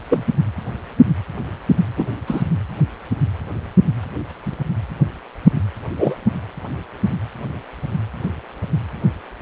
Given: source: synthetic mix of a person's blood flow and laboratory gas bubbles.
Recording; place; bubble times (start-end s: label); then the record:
Doppler ultrasound of blood flow; precordium
0.09-0.25 s: bubbles
1.96-2.06 s: bubbles
2.27-2.44 s: bubbles
5.97-6.16 s: bubbles
From the record:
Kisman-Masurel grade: 123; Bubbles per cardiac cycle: 1 to 2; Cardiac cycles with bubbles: 10 to 50%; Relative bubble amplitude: loud (0.450 to 0.775); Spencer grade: 2 (many but less than half of the cardiac periods contain bubble signals, singularly or in groups); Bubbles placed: anywhere in the cardiac cycle